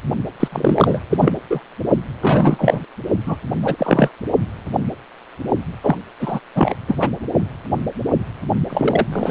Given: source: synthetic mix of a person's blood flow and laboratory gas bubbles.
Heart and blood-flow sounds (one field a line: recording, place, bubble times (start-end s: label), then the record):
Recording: Doppler ultrasound of blood flow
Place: precordium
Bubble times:
0.39-0.48 s: bubbles
0.52-1.00 s: bubbles
1.10-1.33 s: bubbles
1.50-1.60 s: bubbles
2.21-2.80 s: bubbles
3.25-3.37 s: bubbles
3.61-4.10 s: bubbles
5.83-5.97 s: bubbles
6.20-6.40 s: bubbles
6.55-6.74 s: bubbles
6.88-6.96 s: bubbles
7.00-7.10 s: bubbles
8.70-9.07 s: bubbles
9.12-9.31 s: bubbles
From the record:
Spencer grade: 3 (all of the cardiac periods contain showers or single bubble signals, but not dominating or overriding the cardiac motion signals)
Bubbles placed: only in the low amplitude regions of the cardiac cycle